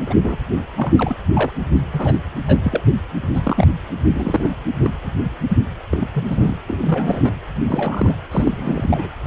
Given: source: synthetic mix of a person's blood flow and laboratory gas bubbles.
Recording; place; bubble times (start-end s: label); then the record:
Doppler ultrasound of blood flow; precordium
0.06-0.15 s: bubbles
0.23-0.39 s: bubbles
0.77-0.92 s: bubbles
0.96-1.16 s: bubbles
1.34-1.51 s: bubbles
1.76-1.81 s: bubbles
1.93-2.18 s: bubbles
2.46-2.58 s: bubbles
2.63-2.83 s: bubbles
3.33-3.67 s: bubbles
4.12-4.52 s: bubbles
4.82-4.90 s: bubbles
5.04-5.11 s: bubbles
5.49-5.60 s: bubbles
5.93-6.08 s: bubbles
6.13-6.56 s: bubbles
6.67-6.79 s: bubbles
6.83-7.35 s: bubbles
7.66-8.16 s: bubbles
8.31-9.08 s: bubbles
9.24-9.27 s: bubbles
From the record:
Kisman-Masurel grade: 242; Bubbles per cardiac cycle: several, 3 to 8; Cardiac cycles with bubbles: 100%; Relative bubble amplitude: moderate (0.250 to 0.450); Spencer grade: 3 (all of the cardiac periods contain showers or single bubble signals, but not dominating or overriding the cardiac motion signals); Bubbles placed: anywhere in the cardiac cycle